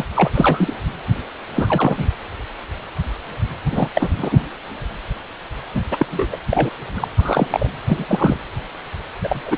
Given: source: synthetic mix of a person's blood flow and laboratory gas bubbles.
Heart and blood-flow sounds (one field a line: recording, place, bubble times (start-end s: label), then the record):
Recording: Doppler ultrasound of blood flow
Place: precordium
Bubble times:
0.00-0.03 s: bubbles
0.16-0.30 s: bubbles
0.34-0.73 s: bubbles
1.54-2.09 s: bubbles
3.71-3.89 s: bubbles
3.94-4.08 s: bubbles
4.17-4.40 s: bubbles
5.75-5.82 s: bubbles
5.91-6.06 s: bubbles
6.12-6.26 s: bubbles
6.32-6.37 s: bubbles
6.51-6.71 s: bubbles
6.96-7.08 s: bubbles
7.17-7.47 s: bubbles
7.50-7.70 s: bubbles
7.87-8.05 s: bubbles
8.09-8.38 s: bubbles
9.23-9.42 s: bubbles
9.46-9.56 s: bubbles
From the record:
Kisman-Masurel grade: 232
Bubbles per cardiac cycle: several, 3 to 8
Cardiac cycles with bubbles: 50 to 99%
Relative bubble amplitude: moderate (0.250 to 0.450)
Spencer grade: 3 (all of the cardiac periods contain showers or single bubble signals, but not dominating or overriding the cardiac motion signals)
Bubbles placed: anywhere in the cardiac cycle